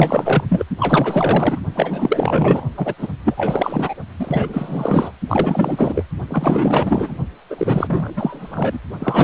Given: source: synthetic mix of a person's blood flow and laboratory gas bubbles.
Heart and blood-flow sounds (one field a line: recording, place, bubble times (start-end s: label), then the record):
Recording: Doppler ultrasound of blood flow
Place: precordium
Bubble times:
0.00-0.44 s: bubbles
0.48-0.65 s: bubbles
0.78-1.65 s: bubbles
1.74-2.65 s: bubbles
2.77-2.94 s: bubbles
2.98-3.07 s: bubbles
3.24-3.95 s: bubbles
4.19-5.11 s: bubbles
5.28-6.04 s: bubbles
6.29-7.18 s: bubbles
7.50-8.79 s: bubbles
8.98-9.24 s: bubbles
From the record:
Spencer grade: 4 (maximum detectable bubble signal sounding continuously throughout systole and diastole of every cardiac period, and overriding the amplitude of the normal cardiac signals)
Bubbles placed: only in the low amplitude regions of the cardiac cycle